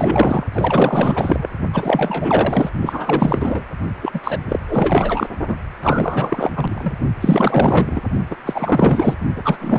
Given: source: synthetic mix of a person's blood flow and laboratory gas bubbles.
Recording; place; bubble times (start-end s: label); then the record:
Doppler ultrasound of blood flow; precordium
0.00-0.45 s: bubbles
0.52-1.47 s: bubbles
1.73-2.71 s: bubbles
2.81-3.66 s: bubbles
4.02-4.20 s: bubbles
4.24-4.38 s: bubbles
4.48-4.59 s: bubbles
4.68-5.27 s: bubbles
5.48-5.55 s: bubbles
5.82-6.51 s: bubbles
6.55-6.93 s: bubbles
7.21-8.01 s: bubbles
8.30-8.35 s: bubbles
8.46-9.14 s: bubbles
9.35-9.57 s: bubbles
9.60-9.79 s: bubbles
From the record:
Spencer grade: 4 (maximum detectable bubble signal sounding continuously throughout systole and diastole of every cardiac period, and overriding the amplitude of the normal cardiac signals); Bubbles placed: only in the low amplitude regions of the cardiac cycle